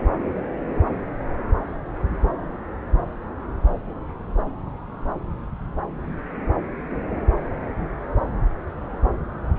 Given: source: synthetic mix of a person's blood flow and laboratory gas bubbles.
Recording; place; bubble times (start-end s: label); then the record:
Doppler ultrasound of blood flow; subclavian vein
no bubbles
From the record:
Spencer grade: 0 (complete lack of bubble signals)